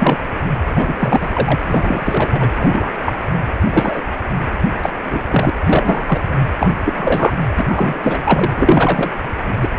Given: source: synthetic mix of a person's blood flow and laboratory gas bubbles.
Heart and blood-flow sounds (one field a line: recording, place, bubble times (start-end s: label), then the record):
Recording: Doppler ultrasound of blood flow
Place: precordium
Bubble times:
0.00-0.17 s: bubbles
0.75-0.97 s: bubbles
0.99-1.29 s: bubbles
1.33-1.60 s: bubbles
1.67-2.48 s: bubbles
2.55-2.92 s: bubbles
3.02-3.12 s: bubbles
3.71-4.02 s: bubbles
4.82-4.92 s: bubbles
5.05-5.23 s: bubbles
5.30-5.50 s: bubbles
5.66-6.21 s: bubbles
6.58-6.74 s: bubbles
6.85-7.37 s: bubbles
7.58-8.00 s: bubbles
8.04-8.18 s: bubbles
8.25-8.52 s: bubbles
8.56-9.11 s: bubbles
9.62-9.69 s: bubbles
9.75-9.79 s: bubbles
From the record:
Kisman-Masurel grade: 233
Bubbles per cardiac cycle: several, 3 to 8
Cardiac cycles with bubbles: 50 to 99%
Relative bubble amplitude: loud (0.450 to 0.775)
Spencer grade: 3 (all of the cardiac periods contain showers or single bubble signals, but not dominating or overriding the cardiac motion signals)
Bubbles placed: anywhere in the cardiac cycle